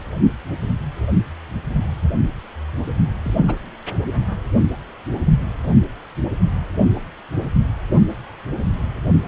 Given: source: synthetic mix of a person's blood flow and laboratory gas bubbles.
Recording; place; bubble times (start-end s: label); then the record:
Doppler ultrasound of blood flow; precordium
3.23-3.56 s: bubbles
From the record:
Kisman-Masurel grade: 121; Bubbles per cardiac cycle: 1 to 2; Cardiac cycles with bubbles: 10 to 50%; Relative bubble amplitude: barely perceptible (0.100 to 0.250); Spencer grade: 2 (many but less than half of the cardiac periods contain bubble signals, singularly or in groups); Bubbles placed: only in the low amplitude regions of the cardiac cycle